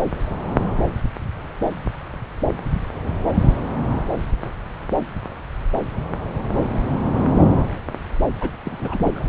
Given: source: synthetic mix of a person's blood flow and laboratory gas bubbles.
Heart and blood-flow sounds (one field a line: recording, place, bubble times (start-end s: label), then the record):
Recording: Doppler ultrasound of blood flow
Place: subclavian vein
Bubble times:
8.40-8.49 s: bubbles
8.64-9.25 s: bubbles
From the record:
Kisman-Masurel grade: 212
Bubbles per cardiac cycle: several, 3 to 8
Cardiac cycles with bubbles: 1 to 10%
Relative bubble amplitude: moderate (0.250 to 0.450)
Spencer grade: 1 (occasional bubble signal discernible with the cardiac motion signal, with majority of cardiac periods free of bubbles)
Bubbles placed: anywhere in the cardiac cycle